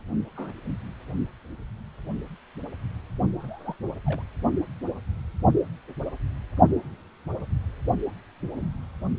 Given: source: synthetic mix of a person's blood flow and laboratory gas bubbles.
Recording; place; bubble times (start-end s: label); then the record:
Doppler ultrasound of blood flow; precordium
0.35-0.54 s: bubbles
3.40-3.76 s: bubbles
4.06-4.22 s: bubbles
8.57-8.66 s: bubbles
From the record:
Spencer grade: 2 (many but less than half of the cardiac periods contain bubble signals, singularly or in groups); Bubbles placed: only in the low amplitude regions of the cardiac cycle